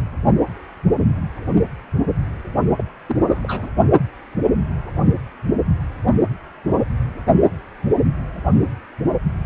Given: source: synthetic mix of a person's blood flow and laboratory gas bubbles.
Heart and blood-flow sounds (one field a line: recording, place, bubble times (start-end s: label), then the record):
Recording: Doppler ultrasound of blood flow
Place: precordium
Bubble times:
2.77-2.83 s: bubbles
3.06-3.17 s: bubbles
3.22-3.69 s: bubbles
From the record:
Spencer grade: 1 (occasional bubble signal discernible with the cardiac motion signal, with majority of cardiac periods free of bubbles)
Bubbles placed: only in the low amplitude regions of the cardiac cycle